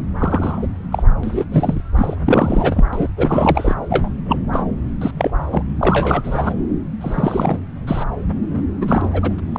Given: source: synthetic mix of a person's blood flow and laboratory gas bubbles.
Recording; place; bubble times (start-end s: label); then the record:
Doppler ultrasound of blood flow; subclavian vein
0.19-0.67 s: bubbles
0.92-1.03 s: bubbles
1.23-1.44 s: bubbles
1.52-1.82 s: bubbles
1.96-2.16 s: bubbles
2.25-2.85 s: bubbles
2.93-3.08 s: bubbles
3.17-3.75 s: bubbles
3.89-4.09 s: bubbles
4.25-4.41 s: bubbles
4.52-4.63 s: bubbles
5.01-5.11 s: bubbles
5.17-5.31 s: bubbles
5.50-5.63 s: bubbles
5.79-6.54 s: bubbles
7.00-7.59 s: bubbles
7.87-8.04 s: bubbles
8.81-9.35 s: bubbles
9.38-9.40 s: bubbles
9.53-9.59 s: bubbles
From the record:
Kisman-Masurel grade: 243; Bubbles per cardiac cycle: several, 3 to 8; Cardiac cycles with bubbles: 100%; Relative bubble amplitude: loud (0.450 to 0.775); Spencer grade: 3 (all of the cardiac periods contain showers or single bubble signals, but not dominating or overriding the cardiac motion signals); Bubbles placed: anywhere in the cardiac cycle